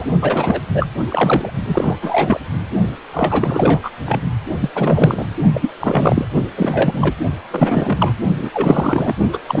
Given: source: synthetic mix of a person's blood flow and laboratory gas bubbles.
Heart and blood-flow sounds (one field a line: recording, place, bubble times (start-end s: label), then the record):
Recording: Doppler ultrasound of blood flow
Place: precordium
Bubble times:
0.00-0.05 s: bubbles
0.21-0.61 s: bubbles
0.74-0.89 s: bubbles
1.10-1.52 s: bubbles
1.66-1.97 s: bubbles
2.02-2.40 s: bubbles
3.13-3.79 s: bubbles
3.83-3.91 s: bubbles
4.04-4.21 s: bubbles
4.60-4.69 s: bubbles
4.73-5.27 s: bubbles
5.53-5.70 s: bubbles
5.80-6.25 s: bubbles
6.56-7.14 s: bubbles
7.50-8.15 s: bubbles
8.38-8.49 s: bubbles
8.54-9.13 s: bubbles
9.32-9.38 s: bubbles
9.47-9.60 s: bubbles
From the record:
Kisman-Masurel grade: 343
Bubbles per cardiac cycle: rolling drumbeat, 9 or more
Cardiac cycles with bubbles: 100%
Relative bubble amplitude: loud (0.450 to 0.775)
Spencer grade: 3 (all of the cardiac periods contain showers or single bubble signals, but not dominating or overriding the cardiac motion signals)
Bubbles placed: only in the low amplitude regions of the cardiac cycle